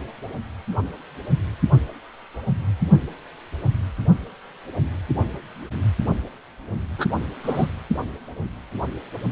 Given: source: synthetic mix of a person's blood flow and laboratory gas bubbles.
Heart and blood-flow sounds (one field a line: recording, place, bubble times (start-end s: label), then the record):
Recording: Doppler ultrasound of blood flow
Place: precordium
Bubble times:
6.98-7.05 s: bubbles
7.44-7.66 s: bubbles
From the record:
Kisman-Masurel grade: 112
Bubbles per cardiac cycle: 1 to 2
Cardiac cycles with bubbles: 1 to 10%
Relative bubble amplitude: moderate (0.250 to 0.450)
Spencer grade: 1 (occasional bubble signal discernible with the cardiac motion signal, with majority of cardiac periods free of bubbles)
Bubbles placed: anywhere in the cardiac cycle